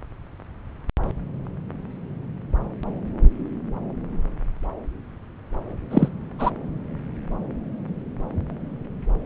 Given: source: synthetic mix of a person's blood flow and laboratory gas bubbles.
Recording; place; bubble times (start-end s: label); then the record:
Doppler ultrasound of blood flow; subclavian vein
5.91-6.08 s: bubbles
6.38-6.50 s: bubbles
From the record:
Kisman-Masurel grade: 113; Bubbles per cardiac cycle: 1 to 2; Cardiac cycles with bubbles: 1 to 10%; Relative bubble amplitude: loud (0.450 to 0.775); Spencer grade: 1 (occasional bubble signal discernible with the cardiac motion signal, with majority of cardiac periods free of bubbles); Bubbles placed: anywhere in the cardiac cycle